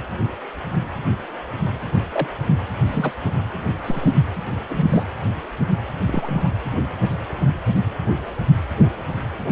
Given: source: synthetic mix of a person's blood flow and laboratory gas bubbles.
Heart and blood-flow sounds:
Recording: Doppler ultrasound of blood flow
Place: precordium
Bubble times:
2.08-2.36 s: bubbles
2.86-3.12 s: bubbles
3.85-4.12 s: bubbles
4.70-4.86 s: bubbles
4.89-5.04 s: bubbles
6.07-6.51 s: bubbles
From the record:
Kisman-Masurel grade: 122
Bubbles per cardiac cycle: 1 to 2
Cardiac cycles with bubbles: 10 to 50%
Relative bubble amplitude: moderate (0.250 to 0.450)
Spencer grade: 2 (many but less than half of the cardiac periods contain bubble signals, singularly or in groups)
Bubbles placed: anywhere in the cardiac cycle

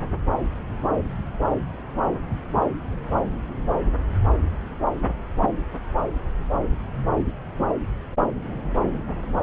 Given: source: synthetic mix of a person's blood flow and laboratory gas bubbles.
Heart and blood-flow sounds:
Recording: Doppler ultrasound of blood flow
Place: subclavian vein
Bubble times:
no bubbles
From the record:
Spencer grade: 0 (complete lack of bubble signals)

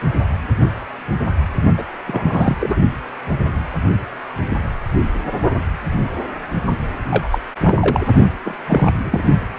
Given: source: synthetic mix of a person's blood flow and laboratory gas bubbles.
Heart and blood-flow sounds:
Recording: Doppler ultrasound of blood flow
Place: precordium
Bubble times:
1.78-1.83 s: bubbles
2.07-2.56 s: bubbles
2.60-2.80 s: bubbles
7.10-7.29 s: bubbles
7.32-7.40 s: bubbles
7.64-7.77 s: bubbles
7.81-8.04 s: bubbles
8.45-8.59 s: bubbles
8.69-8.92 s: bubbles
9.04-9.22 s: bubbles
9.56-9.59 s: bubbles
From the record:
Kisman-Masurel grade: 223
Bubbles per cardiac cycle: several, 3 to 8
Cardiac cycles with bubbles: 10 to 50%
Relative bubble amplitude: loud (0.450 to 0.775)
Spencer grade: 2 (many but less than half of the cardiac periods contain bubble signals, singularly or in groups)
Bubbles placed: only in the low amplitude regions of the cardiac cycle

